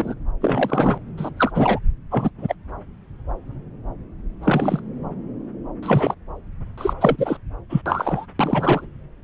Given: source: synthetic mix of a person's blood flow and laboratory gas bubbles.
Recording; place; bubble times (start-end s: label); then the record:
Doppler ultrasound of blood flow; subclavian vein
0.00-0.15 s: bubbles
0.40-0.98 s: bubbles
1.17-1.30 s: bubbles
1.37-1.52 s: bubbles
1.54-1.79 s: bubbles
2.11-2.31 s: bubbles
2.38-2.54 s: bubbles
4.42-4.82 s: bubbles
5.83-6.15 s: bubbles
6.78-6.94 s: bubbles
7.00-7.37 s: bubbles
7.69-7.82 s: bubbles
7.85-8.26 s: bubbles
8.39-8.85 s: bubbles
From the record:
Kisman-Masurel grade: 233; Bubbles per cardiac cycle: several, 3 to 8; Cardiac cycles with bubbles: 50 to 99%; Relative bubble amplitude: loud (0.450 to 0.775); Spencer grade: 3 (all of the cardiac periods contain showers or single bubble signals, but not dominating or overriding the cardiac motion signals); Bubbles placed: anywhere in the cardiac cycle